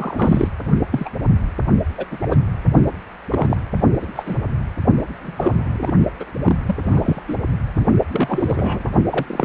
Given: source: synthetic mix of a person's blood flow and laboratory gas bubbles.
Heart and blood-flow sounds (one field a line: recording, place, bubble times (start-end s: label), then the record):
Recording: Doppler ultrasound of blood flow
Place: precordium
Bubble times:
0.00-0.48 s: bubbles
0.92-1.09 s: bubbles
1.98-2.06 s: bubbles
2.11-2.37 s: bubbles
3.30-3.56 s: bubbles
4.01-4.06 s: bubbles
4.15-4.23 s: bubbles
4.25-4.37 s: bubbles
5.22-5.92 s: bubbles
6.19-6.24 s: bubbles
6.44-6.55 s: bubbles
6.66-6.75 s: bubbles
6.83-7.22 s: bubbles
7.28-7.35 s: bubbles
7.75-7.85 s: bubbles
8.11-8.91 s: bubbles
9.03-9.45 s: bubbles
From the record:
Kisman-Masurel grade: 242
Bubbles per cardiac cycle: several, 3 to 8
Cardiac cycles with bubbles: 100%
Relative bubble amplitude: moderate (0.250 to 0.450)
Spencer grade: 3 (all of the cardiac periods contain showers or single bubble signals, but not dominating or overriding the cardiac motion signals)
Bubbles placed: only in the low amplitude regions of the cardiac cycle